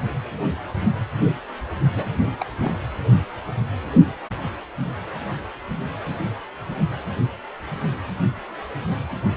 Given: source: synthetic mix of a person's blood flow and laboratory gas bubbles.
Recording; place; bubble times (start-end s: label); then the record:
Doppler ultrasound of blood flow; precordium
1.95-2.15 s: bubbles
2.39-2.46 s: bubbles
2.60-2.73 s: bubbles
From the record:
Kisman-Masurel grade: 211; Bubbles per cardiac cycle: several, 3 to 8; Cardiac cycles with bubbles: 1 to 10%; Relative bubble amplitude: barely perceptible (0.100 to 0.250); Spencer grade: 1 (occasional bubble signal discernible with the cardiac motion signal, with majority of cardiac periods free of bubbles); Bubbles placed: anywhere in the cardiac cycle